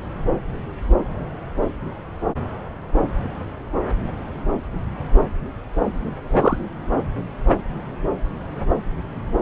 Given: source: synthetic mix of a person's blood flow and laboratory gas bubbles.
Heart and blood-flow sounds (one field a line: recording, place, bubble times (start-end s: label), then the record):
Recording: Doppler ultrasound of blood flow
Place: subclavian vein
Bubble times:
6.27-6.58 s: bubbles
From the record:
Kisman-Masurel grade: 113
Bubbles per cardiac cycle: 1 to 2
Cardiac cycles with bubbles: 1 to 10%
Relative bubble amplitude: loud (0.450 to 0.775)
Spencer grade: 1 (occasional bubble signal discernible with the cardiac motion signal, with majority of cardiac periods free of bubbles)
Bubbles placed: anywhere in the cardiac cycle